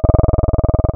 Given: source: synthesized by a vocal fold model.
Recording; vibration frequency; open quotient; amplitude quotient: sustained vowel; 20 Hz; 0.2; 1